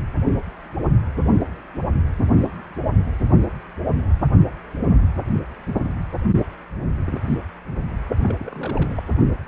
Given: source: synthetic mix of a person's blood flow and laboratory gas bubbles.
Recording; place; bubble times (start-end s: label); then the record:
Doppler ultrasound of blood flow; precordium
8.23-8.34 s: bubbles
8.39-9.03 s: bubbles
From the record:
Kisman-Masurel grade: 211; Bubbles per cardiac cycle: several, 3 to 8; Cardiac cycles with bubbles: 1 to 10%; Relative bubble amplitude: barely perceptible (0.100 to 0.250); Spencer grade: 1 (occasional bubble signal discernible with the cardiac motion signal, with majority of cardiac periods free of bubbles); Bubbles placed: anywhere in the cardiac cycle